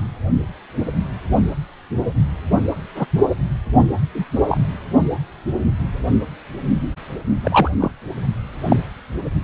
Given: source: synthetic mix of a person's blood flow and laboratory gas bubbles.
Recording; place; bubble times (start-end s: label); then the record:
Doppler ultrasound of blood flow; precordium
2.95-3.06 s: bubbles
4.14-4.25 s: bubbles
4.49-4.61 s: bubbles
7.43-7.71 s: bubbles
7.79-7.92 s: bubbles
8.69-8.77 s: bubbles
From the record:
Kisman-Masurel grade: 123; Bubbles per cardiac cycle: 1 to 2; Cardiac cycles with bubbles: 10 to 50%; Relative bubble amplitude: loud (0.450 to 0.775); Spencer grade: 2 (many but less than half of the cardiac periods contain bubble signals, singularly or in groups); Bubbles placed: anywhere in the cardiac cycle